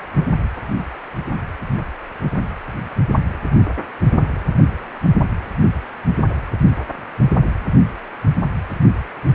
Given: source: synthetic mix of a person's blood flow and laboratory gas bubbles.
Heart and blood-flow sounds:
Doppler ultrasound of blood flow; precordium
no bubbles
From the record:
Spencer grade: 0 (complete lack of bubble signals)

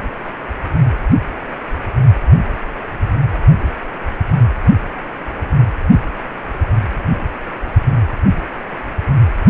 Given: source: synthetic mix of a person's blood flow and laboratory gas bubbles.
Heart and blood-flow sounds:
Doppler ultrasound of blood flow; precordium
no bubbles
From the record:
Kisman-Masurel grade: 000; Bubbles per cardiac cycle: 0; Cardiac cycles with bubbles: 0%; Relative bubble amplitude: no bubbles discernible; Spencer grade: 0 (complete lack of bubble signals)

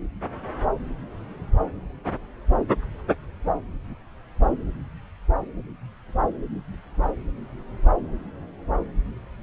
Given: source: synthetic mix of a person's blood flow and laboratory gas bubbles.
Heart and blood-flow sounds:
Doppler ultrasound of blood flow; subclavian vein
no bubbles
From the record:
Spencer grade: 0 (complete lack of bubble signals)

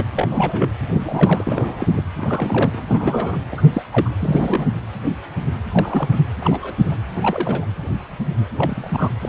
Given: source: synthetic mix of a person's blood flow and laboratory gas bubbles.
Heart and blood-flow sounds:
Doppler ultrasound of blood flow; precordium
0.00-0.04 s: bubbles
0.15-0.28 s: bubbles
0.30-0.69 s: bubbles
0.87-2.01 s: bubbles
2.17-2.82 s: bubbles
2.87-3.38 s: bubbles
3.51-3.62 s: bubbles
3.72-3.83 s: bubbles
3.90-4.09 s: bubbles
4.19-4.66 s: bubbles
5.71-6.17 s: bubbles
6.40-6.72 s: bubbles
6.84-6.94 s: bubbles
7.16-7.65 s: bubbles
8.57-9.10 s: bubbles
9.21-9.29 s: bubbles
From the record:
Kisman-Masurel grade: 232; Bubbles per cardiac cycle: several, 3 to 8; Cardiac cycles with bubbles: 50 to 99%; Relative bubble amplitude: moderate (0.250 to 0.450); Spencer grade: 3 (all of the cardiac periods contain showers or single bubble signals, but not dominating or overriding the cardiac motion signals); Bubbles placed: anywhere in the cardiac cycle

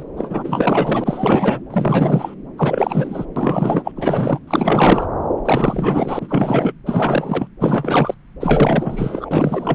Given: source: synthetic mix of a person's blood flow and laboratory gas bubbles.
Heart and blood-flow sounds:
Doppler ultrasound of blood flow; subclavian vein
0.00-0.03 s: bubbles
0.17-1.60 s: bubbles
1.70-2.35 s: bubbles
2.58-3.25 s: bubbles
3.36-3.92 s: bubbles
3.96-4.39 s: bubbles
4.47-5.07 s: bubbles
5.45-6.72 s: bubbles
6.85-7.47 s: bubbles
7.60-8.14 s: bubbles
8.40-9.75 s: bubbles
From the record:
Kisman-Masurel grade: 444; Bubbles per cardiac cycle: continuous sound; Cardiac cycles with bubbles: 100%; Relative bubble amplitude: maximal (0.775 to 0.999); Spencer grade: 4 (maximum detectable bubble signal sounding continuously throughout systole and diastole of every cardiac period, and overriding the amplitude of the normal cardiac signals); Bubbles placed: anywhere in the cardiac cycle

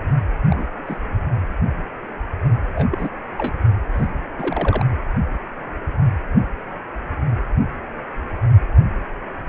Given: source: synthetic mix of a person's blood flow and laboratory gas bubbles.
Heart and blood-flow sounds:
Doppler ultrasound of blood flow; precordium
0.49-0.67 s: bubbles
0.86-0.98 s: bubbles
2.75-2.86 s: bubbles
2.91-3.09 s: bubbles
3.38-3.54 s: bubbles
3.94-4.10 s: bubbles
4.38-4.86 s: bubbles
From the record:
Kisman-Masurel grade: 221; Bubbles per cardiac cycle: several, 3 to 8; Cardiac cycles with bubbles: 10 to 50%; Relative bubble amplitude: barely perceptible (0.100 to 0.250); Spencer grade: 2 (many but less than half of the cardiac periods contain bubble signals, singularly or in groups); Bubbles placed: anywhere in the cardiac cycle

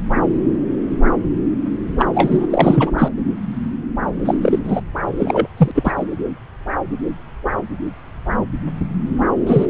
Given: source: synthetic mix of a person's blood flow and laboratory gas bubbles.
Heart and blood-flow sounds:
Doppler ultrasound of blood flow; subclavian vein
1.98-2.08 s: bubbles
2.14-2.46 s: bubbles
2.50-2.91 s: bubbles
2.98-3.08 s: bubbles
4.25-4.34 s: bubbles
4.42-4.59 s: bubbles
4.64-4.80 s: bubbles
5.18-5.48 s: bubbles
5.57-5.71 s: bubbles
5.74-5.92 s: bubbles
5.97-6.06 s: bubbles
9.47-9.66 s: bubbles
From the record:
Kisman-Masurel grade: 223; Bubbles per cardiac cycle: several, 3 to 8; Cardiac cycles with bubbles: 10 to 50%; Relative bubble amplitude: loud (0.450 to 0.775); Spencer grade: 2 (many but less than half of the cardiac periods contain bubble signals, singularly or in groups); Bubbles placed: anywhere in the cardiac cycle

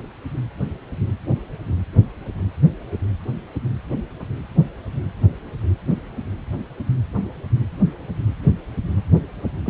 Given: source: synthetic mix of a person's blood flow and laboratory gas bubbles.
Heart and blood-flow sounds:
Doppler ultrasound of blood flow; precordium
9.66-9.70 s: bubbles
From the record:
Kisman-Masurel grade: 212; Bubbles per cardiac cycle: several, 3 to 8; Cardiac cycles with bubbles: 1 to 10%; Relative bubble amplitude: moderate (0.250 to 0.450); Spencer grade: 1 (occasional bubble signal discernible with the cardiac motion signal, with majority of cardiac periods free of bubbles); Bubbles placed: anywhere in the cardiac cycle

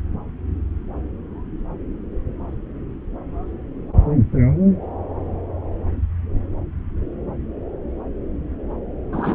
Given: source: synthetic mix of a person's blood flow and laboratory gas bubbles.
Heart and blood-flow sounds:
Doppler ultrasound of blood flow; subclavian vein
9.12-9.35 s: bubbles
From the record:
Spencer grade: 1 (occasional bubble signal discernible with the cardiac motion signal, with majority of cardiac periods free of bubbles); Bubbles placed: anywhere in the cardiac cycle

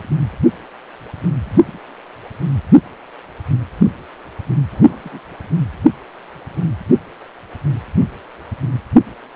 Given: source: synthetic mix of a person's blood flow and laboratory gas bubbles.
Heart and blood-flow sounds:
Doppler ultrasound of blood flow; precordium
1.49-1.78 s: bubbles
4.72-4.96 s: bubbles
5.04-5.20 s: bubbles
From the record:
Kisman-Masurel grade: 121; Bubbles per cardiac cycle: 1 to 2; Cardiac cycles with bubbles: 10 to 50%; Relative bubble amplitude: barely perceptible (0.100 to 0.250); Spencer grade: 2 (many but less than half of the cardiac periods contain bubble signals, singularly or in groups); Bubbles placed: anywhere in the cardiac cycle

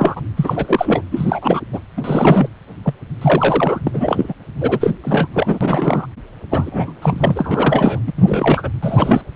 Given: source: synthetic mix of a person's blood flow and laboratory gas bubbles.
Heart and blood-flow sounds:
Doppler ultrasound of blood flow; precordium
0.00-0.21 s: bubbles
0.36-1.02 s: bubbles
1.11-1.60 s: bubbles
1.72-1.80 s: bubbles
1.97-2.48 s: bubbles
2.82-2.94 s: bubbles
3.21-3.79 s: bubbles
3.86-4.33 s: bubbles
4.60-4.92 s: bubbles
5.04-5.28 s: bubbles
5.33-6.07 s: bubbles
6.50-6.93 s: bubbles
7.02-7.99 s: bubbles
8.06-8.12 s: bubbles
8.16-8.70 s: bubbles
8.83-9.22 s: bubbles
From the record:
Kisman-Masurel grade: 343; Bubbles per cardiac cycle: rolling drumbeat, 9 or more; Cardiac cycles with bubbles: 100%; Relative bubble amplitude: loud (0.450 to 0.775); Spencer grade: 3 (all of the cardiac periods contain showers or single bubble signals, but not dominating or overriding the cardiac motion signals); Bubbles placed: anywhere in the cardiac cycle

